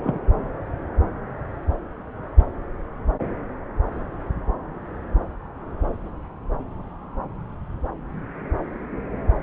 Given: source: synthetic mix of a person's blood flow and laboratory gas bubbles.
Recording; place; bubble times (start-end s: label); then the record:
Doppler ultrasound of blood flow; subclavian vein
0.03-0.18 s: bubbles
From the record:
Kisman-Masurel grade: 112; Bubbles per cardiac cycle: 1 to 2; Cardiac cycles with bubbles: 1 to 10%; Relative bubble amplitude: moderate (0.250 to 0.450); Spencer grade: 1 (occasional bubble signal discernible with the cardiac motion signal, with majority of cardiac periods free of bubbles); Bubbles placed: anywhere in the cardiac cycle